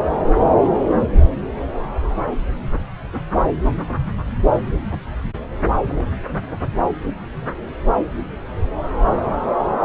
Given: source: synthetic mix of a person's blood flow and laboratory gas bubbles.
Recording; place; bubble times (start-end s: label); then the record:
Doppler ultrasound of blood flow; subclavian vein
4.91-4.99 s: bubbles
5.89-6.06 s: bubbles
From the record:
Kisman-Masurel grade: 121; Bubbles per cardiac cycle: 1 to 2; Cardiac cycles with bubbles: 10 to 50%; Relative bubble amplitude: barely perceptible (0.100 to 0.250); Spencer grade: 2 (many but less than half of the cardiac periods contain bubble signals, singularly or in groups); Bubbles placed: anywhere in the cardiac cycle